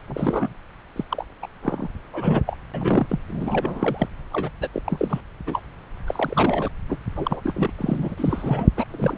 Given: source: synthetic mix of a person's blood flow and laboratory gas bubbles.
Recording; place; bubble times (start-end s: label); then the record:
Doppler ultrasound of blood flow; subclavian vein
0.07-0.54 s: bubbles
0.95-1.04 s: bubbles
1.10-1.25 s: bubbles
1.42-1.47 s: bubbles
1.62-1.88 s: bubbles
2.12-2.44 s: bubbles
2.46-2.56 s: bubbles
2.73-3.06 s: bubbles
3.09-3.19 s: bubbles
3.27-4.08 s: bubbles
4.32-4.50 s: bubbles
4.61-4.68 s: bubbles
4.73-4.82 s: bubbles
4.85-5.21 s: bubbles
5.47-5.60 s: bubbles
6.07-6.68 s: bubbles
6.88-6.98 s: bubbles
7.16-7.72 s: bubbles
7.78-8.71 s: bubbles
8.76-8.84 s: bubbles
8.90-9.18 s: bubbles
From the record:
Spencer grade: 3 (all of the cardiac periods contain showers or single bubble signals, but not dominating or overriding the cardiac motion signals); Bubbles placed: anywhere in the cardiac cycle